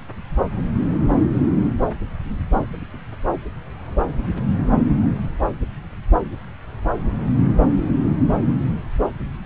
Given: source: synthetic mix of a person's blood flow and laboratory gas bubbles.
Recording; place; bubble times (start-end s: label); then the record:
Doppler ultrasound of blood flow; subclavian vein
no bubbles
From the record:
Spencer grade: 0 (complete lack of bubble signals)